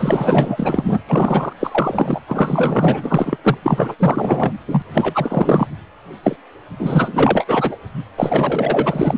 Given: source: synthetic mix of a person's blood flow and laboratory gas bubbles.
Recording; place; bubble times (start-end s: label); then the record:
Doppler ultrasound of blood flow; precordium
0.00-1.01 s: bubbles
1.07-1.53 s: bubbles
1.59-2.21 s: bubbles
2.28-3.37 s: bubbles
3.43-3.58 s: bubbles
3.62-3.95 s: bubbles
3.98-4.52 s: bubbles
4.67-4.82 s: bubbles
4.93-5.67 s: bubbles
6.23-6.36 s: bubbles
6.79-7.78 s: bubbles
8.17-9.18 s: bubbles
From the record:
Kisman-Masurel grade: 444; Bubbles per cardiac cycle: continuous sound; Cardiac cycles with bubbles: 100%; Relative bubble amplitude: maximal (0.775 to 0.999); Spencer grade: 4 (maximum detectable bubble signal sounding continuously throughout systole and diastole of every cardiac period, and overriding the amplitude of the normal cardiac signals); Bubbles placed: anywhere in the cardiac cycle